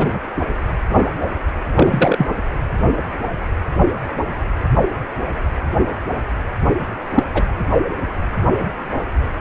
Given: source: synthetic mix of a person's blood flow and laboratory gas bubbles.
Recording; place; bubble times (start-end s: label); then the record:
Doppler ultrasound of blood flow; precordium
0.00-0.19 s: bubbles
0.36-0.43 s: bubbles
1.75-2.27 s: bubbles
7.15-7.23 s: bubbles
7.34-7.45 s: bubbles
From the record:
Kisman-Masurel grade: 123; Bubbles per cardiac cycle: 1 to 2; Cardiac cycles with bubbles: 10 to 50%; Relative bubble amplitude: loud (0.450 to 0.775); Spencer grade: 2 (many but less than half of the cardiac periods contain bubble signals, singularly or in groups); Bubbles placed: anywhere in the cardiac cycle